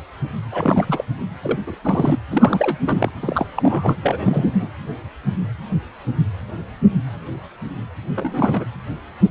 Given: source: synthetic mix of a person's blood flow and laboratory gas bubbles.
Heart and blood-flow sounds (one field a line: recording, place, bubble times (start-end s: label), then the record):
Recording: Doppler ultrasound of blood flow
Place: precordium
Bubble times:
0.52-1.05 s: bubbles
1.43-1.59 s: bubbles
1.67-1.76 s: bubbles
1.83-2.19 s: bubbles
2.31-2.77 s: bubbles
2.84-3.11 s: bubbles
3.22-3.46 s: bubbles
3.56-3.97 s: bubbles
4.03-4.68 s: bubbles
8.15-8.66 s: bubbles
From the record:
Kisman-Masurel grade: 332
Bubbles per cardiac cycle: rolling drumbeat, 9 or more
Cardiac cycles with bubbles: 50 to 99%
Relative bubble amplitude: moderate (0.250 to 0.450)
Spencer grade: 3 (all of the cardiac periods contain showers or single bubble signals, but not dominating or overriding the cardiac motion signals)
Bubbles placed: anywhere in the cardiac cycle